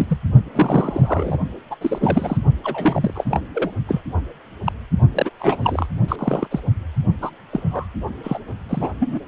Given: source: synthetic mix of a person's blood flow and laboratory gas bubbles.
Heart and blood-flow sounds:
Doppler ultrasound of blood flow; precordium
0.00-0.06 s: bubbles
0.09-0.18 s: bubbles
0.54-1.38 s: bubbles
1.70-1.76 s: bubbles
1.81-2.38 s: bubbles
2.64-3.40 s: bubbles
3.53-3.71 s: bubbles
3.88-4.01 s: bubbles
4.64-4.72 s: bubbles
5.14-5.31 s: bubbles
5.39-5.86 s: bubbles
6.08-6.16 s: bubbles
6.18-6.47 s: bubbles
6.50-6.60 s: bubbles
7.21-7.30 s: bubbles
7.52-7.87 s: bubbles
8.23-8.39 s: bubbles
8.69-8.90 s: bubbles
8.99-9.20 s: bubbles
From the record:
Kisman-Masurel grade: 242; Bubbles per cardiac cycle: several, 3 to 8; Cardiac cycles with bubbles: 100%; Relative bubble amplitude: moderate (0.250 to 0.450); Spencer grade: 3 (all of the cardiac periods contain showers or single bubble signals, but not dominating or overriding the cardiac motion signals); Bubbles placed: only in the low amplitude regions of the cardiac cycle

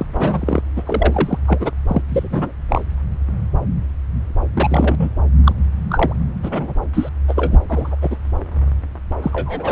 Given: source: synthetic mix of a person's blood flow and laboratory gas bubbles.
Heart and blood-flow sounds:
Doppler ultrasound of blood flow; subclavian vein
0.00-0.06 s: bubbles
0.18-0.61 s: bubbles
0.76-0.83 s: bubbles
0.85-1.39 s: bubbles
1.46-1.71 s: bubbles
1.87-2.02 s: bubbles
2.08-2.52 s: bubbles
2.69-2.81 s: bubbles
4.56-5.10 s: bubbles
5.43-5.52 s: bubbles
5.89-6.13 s: bubbles
6.42-6.74 s: bubbles
6.93-7.09 s: bubbles
7.28-7.59 s: bubbles
7.69-7.96 s: bubbles
8.02-8.17 s: bubbles
9.22-9.72 s: bubbles
From the record:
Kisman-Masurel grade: 233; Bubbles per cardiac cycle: several, 3 to 8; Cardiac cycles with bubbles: 50 to 99%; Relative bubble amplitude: loud (0.450 to 0.775); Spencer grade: 3 (all of the cardiac periods contain showers or single bubble signals, but not dominating or overriding the cardiac motion signals); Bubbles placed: anywhere in the cardiac cycle

